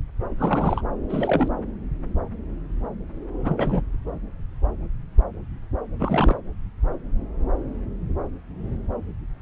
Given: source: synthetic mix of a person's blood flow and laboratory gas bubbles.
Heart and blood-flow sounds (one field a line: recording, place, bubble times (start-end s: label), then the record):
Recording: Doppler ultrasound of blood flow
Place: subclavian vein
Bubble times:
0.38-0.82 s: bubbles
1.09-1.49 s: bubbles
3.44-3.82 s: bubbles
5.98-6.38 s: bubbles
From the record:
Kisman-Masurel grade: 222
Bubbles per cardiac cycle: several, 3 to 8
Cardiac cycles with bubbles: 10 to 50%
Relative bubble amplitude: moderate (0.250 to 0.450)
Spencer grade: 2 (many but less than half of the cardiac periods contain bubble signals, singularly or in groups)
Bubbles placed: anywhere in the cardiac cycle